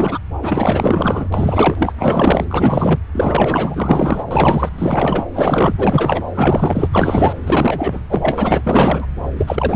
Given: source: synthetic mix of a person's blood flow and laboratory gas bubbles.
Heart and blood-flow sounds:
Doppler ultrasound of blood flow; subclavian vein
0.00-0.18 s: bubbles
0.42-1.28 s: bubbles
1.32-1.92 s: bubbles
1.96-2.46 s: bubbles
2.50-3.00 s: bubbles
3.12-4.25 s: bubbles
4.31-4.69 s: bubbles
4.78-5.26 s: bubbles
5.33-5.73 s: bubbles
5.78-6.24 s: bubbles
6.34-6.89 s: bubbles
6.93-7.33 s: bubbles
7.46-8.00 s: bubbles
8.08-9.06 s: bubbles
9.38-9.76 s: bubbles
From the record:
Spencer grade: 4 (maximum detectable bubble signal sounding continuously throughout systole and diastole of every cardiac period, and overriding the amplitude of the normal cardiac signals); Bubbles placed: anywhere in the cardiac cycle

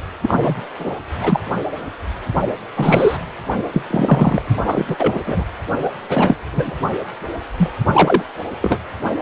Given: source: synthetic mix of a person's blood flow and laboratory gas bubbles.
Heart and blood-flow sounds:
Doppler ultrasound of blood flow; precordium
0.21-0.62 s: bubbles
0.79-0.95 s: bubbles
1.21-1.40 s: bubbles
2.76-3.17 s: bubbles
3.72-3.84 s: bubbles
3.90-4.42 s: bubbles
4.64-4.86 s: bubbles
4.88-4.96 s: bubbles
4.99-5.22 s: bubbles
5.26-5.44 s: bubbles
5.83-5.90 s: bubbles
6.09-6.35 s: bubbles
6.52-6.74 s: bubbles
7.58-7.72 s: bubbles
7.93-8.23 s: bubbles
8.62-8.78 s: bubbles
From the record:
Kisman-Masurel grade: 233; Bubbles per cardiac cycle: several, 3 to 8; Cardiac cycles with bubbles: 50 to 99%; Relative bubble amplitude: loud (0.450 to 0.775); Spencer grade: 3 (all of the cardiac periods contain showers or single bubble signals, but not dominating or overriding the cardiac motion signals); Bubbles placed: anywhere in the cardiac cycle

